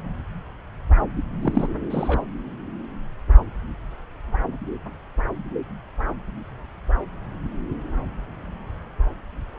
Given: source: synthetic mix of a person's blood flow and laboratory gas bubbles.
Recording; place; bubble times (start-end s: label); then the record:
Doppler ultrasound of blood flow; subclavian vein
1.42-1.67 s: bubbles
1.90-2.24 s: bubbles
From the record:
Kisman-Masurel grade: 212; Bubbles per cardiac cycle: several, 3 to 8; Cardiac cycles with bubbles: 1 to 10%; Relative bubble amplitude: moderate (0.250 to 0.450); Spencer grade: 1 (occasional bubble signal discernible with the cardiac motion signal, with majority of cardiac periods free of bubbles); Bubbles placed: anywhere in the cardiac cycle